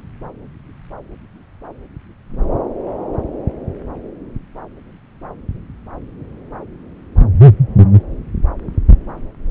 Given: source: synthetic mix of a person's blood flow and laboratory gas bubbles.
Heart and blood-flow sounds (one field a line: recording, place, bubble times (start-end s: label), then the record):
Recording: Doppler ultrasound of blood flow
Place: subclavian vein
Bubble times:
no bubbles
From the record:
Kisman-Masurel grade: 000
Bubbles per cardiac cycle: 0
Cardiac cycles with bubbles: 0%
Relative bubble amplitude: no bubbles discernible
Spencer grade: 0 (complete lack of bubble signals)